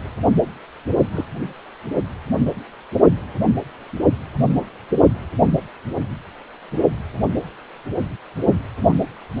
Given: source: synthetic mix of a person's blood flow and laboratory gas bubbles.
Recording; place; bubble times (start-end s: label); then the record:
Doppler ultrasound of blood flow; precordium
1.12-1.25 s: bubbles
8.88-8.93 s: bubbles
9.38-9.40 s: bubbles
From the record:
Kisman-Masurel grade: 122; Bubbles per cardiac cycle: 1 to 2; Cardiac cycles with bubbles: 10 to 50%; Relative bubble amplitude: moderate (0.250 to 0.450); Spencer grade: 2 (many but less than half of the cardiac periods contain bubble signals, singularly or in groups); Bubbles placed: anywhere in the cardiac cycle